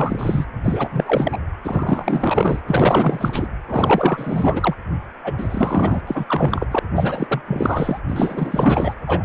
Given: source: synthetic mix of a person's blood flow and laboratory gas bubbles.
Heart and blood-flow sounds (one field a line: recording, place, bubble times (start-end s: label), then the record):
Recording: Doppler ultrasound of blood flow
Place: precordium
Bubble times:
0.00-0.45 s: bubbles
0.59-1.38 s: bubbles
1.64-2.61 s: bubbles
2.67-3.48 s: bubbles
3.68-4.75 s: bubbles
5.24-6.01 s: bubbles
6.07-6.67 s: bubbles
6.71-6.79 s: bubbles
6.95-7.42 s: bubbles
7.47-7.99 s: bubbles
8.08-8.94 s: bubbles
9.06-9.25 s: bubbles
From the record:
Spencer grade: 4 (maximum detectable bubble signal sounding continuously throughout systole and diastole of every cardiac period, and overriding the amplitude of the normal cardiac signals)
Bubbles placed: anywhere in the cardiac cycle